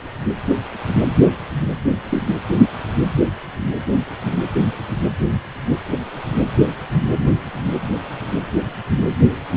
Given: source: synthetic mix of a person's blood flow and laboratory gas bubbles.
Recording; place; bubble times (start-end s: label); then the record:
Doppler ultrasound of blood flow; precordium
2.09-2.23 s: bubbles
From the record:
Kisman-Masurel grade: 112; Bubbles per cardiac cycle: 1 to 2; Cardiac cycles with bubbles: 1 to 10%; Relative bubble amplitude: moderate (0.250 to 0.450); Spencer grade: 1 (occasional bubble signal discernible with the cardiac motion signal, with majority of cardiac periods free of bubbles); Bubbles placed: anywhere in the cardiac cycle